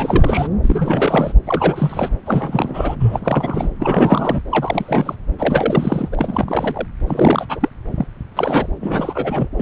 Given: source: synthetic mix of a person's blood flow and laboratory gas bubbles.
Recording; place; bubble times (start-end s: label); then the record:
Doppler ultrasound of blood flow; subclavian vein
0.00-0.48 s: bubbles
0.63-1.32 s: bubbles
1.46-2.09 s: bubbles
2.26-2.96 s: bubbles
3.00-3.71 s: bubbles
3.79-4.41 s: bubbles
4.50-5.16 s: bubbles
5.38-6.09 s: bubbles
6.12-6.88 s: bubbles
7.06-7.46 s: bubbles
7.49-7.69 s: bubbles
7.96-8.06 s: bubbles
8.34-8.68 s: bubbles
8.80-9.48 s: bubbles
9.56-9.62 s: bubbles
From the record:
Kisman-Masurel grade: 342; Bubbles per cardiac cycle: rolling drumbeat, 9 or more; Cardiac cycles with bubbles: 100%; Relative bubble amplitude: moderate (0.250 to 0.450); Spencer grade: 3 (all of the cardiac periods contain showers or single bubble signals, but not dominating or overriding the cardiac motion signals); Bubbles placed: anywhere in the cardiac cycle